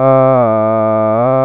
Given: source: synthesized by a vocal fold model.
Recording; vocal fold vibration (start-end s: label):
sustained vowel that changes in the middle
0.00-0.31 s: 131.9 Hz, open quotient 0.50
0.51-1.11 s: 109.5 Hz, open quotient 0.37
1.31-1.45 s: 131.9 Hz, open quotient 0.50